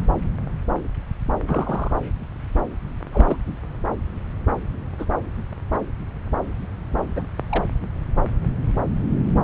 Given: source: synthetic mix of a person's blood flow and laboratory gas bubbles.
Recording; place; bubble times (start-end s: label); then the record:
Doppler ultrasound of blood flow; subclavian vein
1.47-1.92 s: bubbles
3.12-3.37 s: bubbles
4.99-5.05 s: bubbles
7.16-7.24 s: bubbles
7.50-7.64 s: bubbles
From the record:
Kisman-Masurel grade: 122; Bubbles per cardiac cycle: 1 to 2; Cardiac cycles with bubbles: 10 to 50%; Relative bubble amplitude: moderate (0.250 to 0.450); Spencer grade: 2 (many but less than half of the cardiac periods contain bubble signals, singularly or in groups); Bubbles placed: anywhere in the cardiac cycle